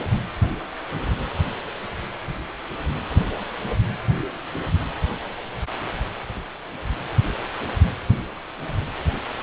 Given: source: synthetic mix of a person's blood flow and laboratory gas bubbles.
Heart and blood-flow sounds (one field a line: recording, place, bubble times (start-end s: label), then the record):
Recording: Doppler ultrasound of blood flow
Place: precordium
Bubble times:
no bubbles
From the record:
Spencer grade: 0 (complete lack of bubble signals)